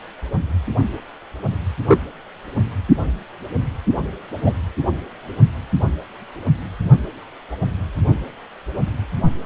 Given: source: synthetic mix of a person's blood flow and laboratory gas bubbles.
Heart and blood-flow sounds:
Doppler ultrasound of blood flow; precordium
1.88-1.99 s: bubbles
4.46-4.53 s: bubbles
From the record:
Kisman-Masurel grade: 123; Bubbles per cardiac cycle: 1 to 2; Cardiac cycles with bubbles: 10 to 50%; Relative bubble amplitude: loud (0.450 to 0.775); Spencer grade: 2 (many but less than half of the cardiac periods contain bubble signals, singularly or in groups); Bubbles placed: only in the low amplitude regions of the cardiac cycle

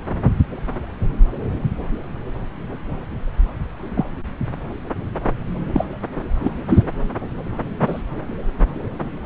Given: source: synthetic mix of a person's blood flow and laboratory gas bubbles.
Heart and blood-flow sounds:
Doppler ultrasound of blood flow; subclavian vein
3.95-4.04 s: bubbles
5.73-5.85 s: bubbles
6.43-6.50 s: bubbles
6.68-6.84 s: bubbles
7.81-8.02 s: bubbles
From the record:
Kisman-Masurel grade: 122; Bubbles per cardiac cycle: 1 to 2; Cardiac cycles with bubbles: 10 to 50%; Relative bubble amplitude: moderate (0.250 to 0.450); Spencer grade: 2 (many but less than half of the cardiac periods contain bubble signals, singularly or in groups); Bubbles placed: anywhere in the cardiac cycle

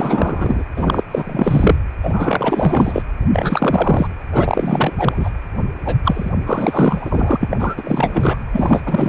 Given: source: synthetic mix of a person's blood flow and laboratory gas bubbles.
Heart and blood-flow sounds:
Doppler ultrasound of blood flow; precordium
0.00-0.64 s: bubbles
0.77-1.04 s: bubbles
1.11-1.79 s: bubbles
2.03-3.02 s: bubbles
3.33-4.08 s: bubbles
4.32-5.30 s: bubbles
5.84-5.96 s: bubbles
6.04-6.30 s: bubbles
6.45-7.36 s: bubbles
7.40-8.38 s: bubbles
8.53-8.83 s: bubbles
8.86-9.09 s: bubbles
From the record:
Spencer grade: 4 (maximum detectable bubble signal sounding continuously throughout systole and diastole of every cardiac period, and overriding the amplitude of the normal cardiac signals); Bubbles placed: anywhere in the cardiac cycle

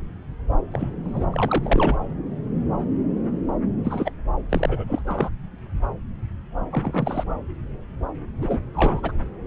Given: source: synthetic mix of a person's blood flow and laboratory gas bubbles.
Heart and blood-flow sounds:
Doppler ultrasound of blood flow; subclavian vein
0.72-0.88 s: bubbles
1.04-1.26 s: bubbles
1.30-1.97 s: bubbles
3.84-4.12 s: bubbles
4.49-4.84 s: bubbles
4.88-5.01 s: bubbles
5.07-5.29 s: bubbles
6.70-7.24 s: bubbles
8.41-8.62 s: bubbles
8.73-9.12 s: bubbles
From the record:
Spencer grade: 2 (many but less than half of the cardiac periods contain bubble signals, singularly or in groups); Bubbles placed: anywhere in the cardiac cycle

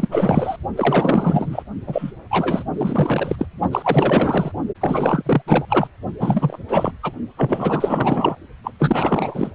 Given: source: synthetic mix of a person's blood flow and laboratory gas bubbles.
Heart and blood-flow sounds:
Doppler ultrasound of blood flow; precordium
0.00-0.09 s: bubbles
0.11-0.56 s: bubbles
0.76-1.63 s: bubbles
1.86-2.12 s: bubbles
2.30-2.63 s: bubbles
2.73-3.36 s: bubbles
3.38-3.46 s: bubbles
3.71-4.51 s: bubbles
4.80-5.22 s: bubbles
5.25-5.42 s: bubbles
5.47-5.65 s: bubbles
5.68-5.88 s: bubbles
6.18-6.58 s: bubbles
6.68-6.92 s: bubbles
7.02-7.12 s: bubbles
7.37-8.37 s: bubbles
8.63-8.71 s: bubbles
8.79-9.51 s: bubbles
From the record:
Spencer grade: 4 (maximum detectable bubble signal sounding continuously throughout systole and diastole of every cardiac period, and overriding the amplitude of the normal cardiac signals); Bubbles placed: only in the low amplitude regions of the cardiac cycle

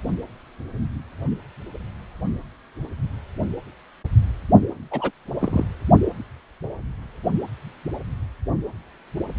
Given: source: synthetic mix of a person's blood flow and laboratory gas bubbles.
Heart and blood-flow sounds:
Doppler ultrasound of blood flow; precordium
4.91-5.11 s: bubbles
5.39-5.65 s: bubbles
From the record:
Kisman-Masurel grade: 112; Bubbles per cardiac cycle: 1 to 2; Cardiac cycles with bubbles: 1 to 10%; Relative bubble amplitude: moderate (0.250 to 0.450); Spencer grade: 1 (occasional bubble signal discernible with the cardiac motion signal, with majority of cardiac periods free of bubbles); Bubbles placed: only in the low amplitude regions of the cardiac cycle

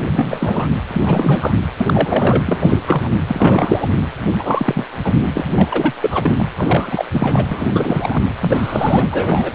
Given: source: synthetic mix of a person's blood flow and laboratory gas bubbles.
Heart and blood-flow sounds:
Doppler ultrasound of blood flow; precordium
0.06-0.67 s: bubbles
0.87-1.02 s: bubbles
1.05-1.55 s: bubbles
1.77-2.43 s: bubbles
2.47-2.78 s: bubbles
2.87-3.20 s: bubbles
3.27-3.87 s: bubbles
4.38-4.85 s: bubbles
5.04-5.15 s: bubbles
5.34-5.46 s: bubbles
5.55-5.92 s: bubbles
6.00-6.44 s: bubbles
6.58-7.05 s: bubbles
7.11-7.66 s: bubbles
7.73-8.23 s: bubbles
8.41-9.55 s: bubbles
From the record:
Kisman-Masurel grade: 343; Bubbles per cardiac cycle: rolling drumbeat, 9 or more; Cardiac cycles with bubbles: 100%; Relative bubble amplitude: loud (0.450 to 0.775); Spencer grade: 3 (all of the cardiac periods contain showers or single bubble signals, but not dominating or overriding the cardiac motion signals); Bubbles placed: anywhere in the cardiac cycle

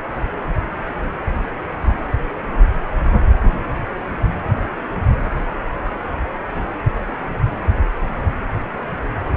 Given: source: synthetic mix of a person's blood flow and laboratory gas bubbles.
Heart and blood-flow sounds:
Doppler ultrasound of blood flow; precordium
no bubbles
From the record:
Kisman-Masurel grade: 000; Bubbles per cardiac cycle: 0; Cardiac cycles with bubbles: 0%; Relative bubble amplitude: no bubbles discernible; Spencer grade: 0 (complete lack of bubble signals)

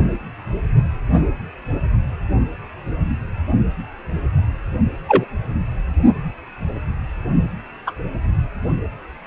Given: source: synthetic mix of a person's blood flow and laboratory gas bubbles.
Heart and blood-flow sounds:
Doppler ultrasound of blood flow; precordium
5.08-5.25 s: bubbles
7.86-7.92 s: bubbles
From the record:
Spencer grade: 2 (many but less than half of the cardiac periods contain bubble signals, singularly or in groups); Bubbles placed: only in the low amplitude regions of the cardiac cycle

